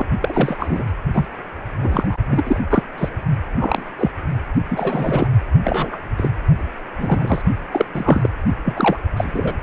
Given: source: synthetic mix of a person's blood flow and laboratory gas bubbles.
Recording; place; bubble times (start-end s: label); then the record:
Doppler ultrasound of blood flow; precordium
0.00-0.05 s: bubbles
0.22-0.85 s: bubbles
1.14-1.25 s: bubbles
1.82-2.17 s: bubbles
2.30-2.60 s: bubbles
2.70-2.83 s: bubbles
2.98-3.09 s: bubbles
3.57-3.82 s: bubbles
3.98-4.10 s: bubbles
4.68-5.27 s: bubbles
5.63-5.97 s: bubbles
6.17-6.32 s: bubbles
6.98-7.42 s: bubbles
7.71-7.85 s: bubbles
7.93-8.30 s: bubbles
8.65-8.97 s: bubbles
9.17-9.54 s: bubbles
From the record:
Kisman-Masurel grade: 243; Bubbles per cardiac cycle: several, 3 to 8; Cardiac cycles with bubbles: 100%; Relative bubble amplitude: loud (0.450 to 0.775); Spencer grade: 3 (all of the cardiac periods contain showers or single bubble signals, but not dominating or overriding the cardiac motion signals); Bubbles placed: only in the low amplitude regions of the cardiac cycle